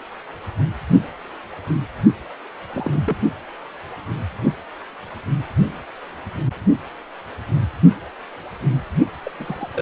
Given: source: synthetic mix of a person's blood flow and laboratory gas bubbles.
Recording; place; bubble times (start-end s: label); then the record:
Doppler ultrasound of blood flow; precordium
2.72-3.03 s: bubbles
3.05-3.16 s: bubbles
9.23-9.31 s: bubbles
9.39-9.69 s: bubbles
9.72-9.82 s: bubbles
From the record:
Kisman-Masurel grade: 221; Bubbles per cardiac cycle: several, 3 to 8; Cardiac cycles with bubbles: 10 to 50%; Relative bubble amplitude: barely perceptible (0.100 to 0.250); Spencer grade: 2 (many but less than half of the cardiac periods contain bubble signals, singularly or in groups); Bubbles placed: only in the low amplitude regions of the cardiac cycle